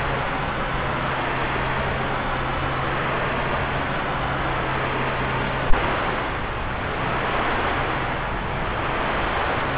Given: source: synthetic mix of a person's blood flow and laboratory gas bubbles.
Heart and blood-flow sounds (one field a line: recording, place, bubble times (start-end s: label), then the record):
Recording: Doppler ultrasound of blood flow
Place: subclavian vein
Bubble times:
no bubbles
From the record:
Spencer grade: 0 (complete lack of bubble signals)